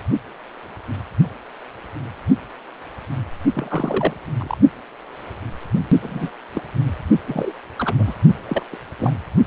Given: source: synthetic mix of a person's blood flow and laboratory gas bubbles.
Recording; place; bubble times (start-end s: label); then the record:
Doppler ultrasound of blood flow; precordium
3.55-4.13 s: bubbles
4.39-4.57 s: bubbles
6.01-6.32 s: bubbles
6.54-6.61 s: bubbles
7.27-7.52 s: bubbles
7.77-8.15 s: bubbles
8.47-8.62 s: bubbles
8.71-8.76 s: bubbles
8.98-9.13 s: bubbles
From the record:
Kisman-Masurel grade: 222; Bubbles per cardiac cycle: several, 3 to 8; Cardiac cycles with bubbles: 10 to 50%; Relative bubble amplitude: moderate (0.250 to 0.450); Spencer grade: 2 (many but less than half of the cardiac periods contain bubble signals, singularly or in groups); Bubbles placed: only in the low amplitude regions of the cardiac cycle